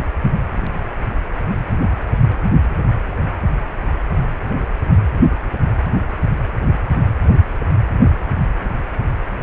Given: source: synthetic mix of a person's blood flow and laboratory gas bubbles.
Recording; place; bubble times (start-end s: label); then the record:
Doppler ultrasound of blood flow; precordium
no bubbles
From the record:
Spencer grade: 0 (complete lack of bubble signals)